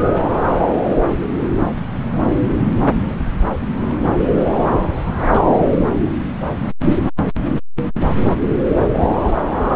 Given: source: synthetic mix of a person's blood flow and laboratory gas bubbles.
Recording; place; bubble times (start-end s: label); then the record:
Doppler ultrasound of blood flow; subclavian vein
0.12-0.23 s: bubbles
1.08-1.40 s: bubbles
2.88-3.15 s: bubbles
3.81-3.96 s: bubbles
5.29-5.46 s: bubbles
6.89-6.94 s: bubbles
8.08-8.11 s: bubbles
From the record:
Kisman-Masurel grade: 121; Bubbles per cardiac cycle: 1 to 2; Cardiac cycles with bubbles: 10 to 50%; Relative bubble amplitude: barely perceptible (0.100 to 0.250); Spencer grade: 2 (many but less than half of the cardiac periods contain bubble signals, singularly or in groups); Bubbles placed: anywhere in the cardiac cycle